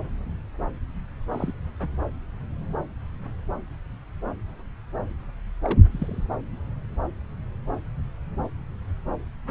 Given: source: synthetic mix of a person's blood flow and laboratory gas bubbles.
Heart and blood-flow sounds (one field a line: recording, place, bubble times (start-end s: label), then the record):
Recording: Doppler ultrasound of blood flow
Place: subclavian vein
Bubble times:
1.30-1.52 s: bubbles
5.64-5.79 s: bubbles
5.91-6.25 s: bubbles
From the record:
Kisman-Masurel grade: 121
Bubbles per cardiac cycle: 1 to 2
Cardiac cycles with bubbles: 10 to 50%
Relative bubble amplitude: barely perceptible (0.100 to 0.250)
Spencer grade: 2 (many but less than half of the cardiac periods contain bubble signals, singularly or in groups)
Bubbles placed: anywhere in the cardiac cycle